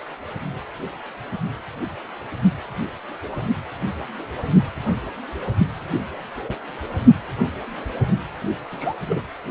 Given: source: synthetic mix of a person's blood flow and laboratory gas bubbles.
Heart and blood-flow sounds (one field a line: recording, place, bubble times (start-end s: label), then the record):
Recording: Doppler ultrasound of blood flow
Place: precordium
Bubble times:
6.47-6.55 s: bubbles
8.71-8.94 s: bubbles
9.09-9.21 s: bubbles
From the record:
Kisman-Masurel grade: 122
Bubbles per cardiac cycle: 1 to 2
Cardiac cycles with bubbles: 10 to 50%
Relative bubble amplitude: moderate (0.250 to 0.450)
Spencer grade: 2 (many but less than half of the cardiac periods contain bubble signals, singularly or in groups)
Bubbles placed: only in the low amplitude regions of the cardiac cycle